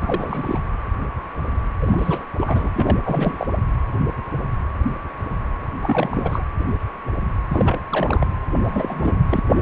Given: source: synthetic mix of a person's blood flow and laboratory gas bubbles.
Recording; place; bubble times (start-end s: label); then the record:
Doppler ultrasound of blood flow; precordium
0.00-0.60 s: bubbles
1.81-2.25 s: bubbles
2.38-2.71 s: bubbles
2.75-2.98 s: bubbles
3.04-3.47 s: bubbles
5.83-6.43 s: bubbles
7.49-7.79 s: bubbles
7.89-8.27 s: bubbles
8.62-9.19 s: bubbles
9.29-9.40 s: bubbles
9.47-9.62 s: bubbles
From the record:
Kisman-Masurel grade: 332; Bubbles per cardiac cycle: rolling drumbeat, 9 or more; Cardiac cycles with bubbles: 50 to 99%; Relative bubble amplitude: moderate (0.250 to 0.450); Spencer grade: 3 (all of the cardiac periods contain showers or single bubble signals, but not dominating or overriding the cardiac motion signals); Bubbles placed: anywhere in the cardiac cycle